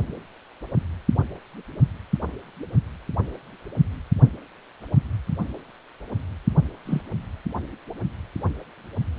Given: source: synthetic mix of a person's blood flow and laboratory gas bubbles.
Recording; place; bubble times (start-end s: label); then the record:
Doppler ultrasound of blood flow; precordium
6.85-7.01 s: bubbles
From the record:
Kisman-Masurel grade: 112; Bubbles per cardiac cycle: 1 to 2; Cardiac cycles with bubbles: 1 to 10%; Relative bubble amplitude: moderate (0.250 to 0.450); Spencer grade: 1 (occasional bubble signal discernible with the cardiac motion signal, with majority of cardiac periods free of bubbles); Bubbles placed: anywhere in the cardiac cycle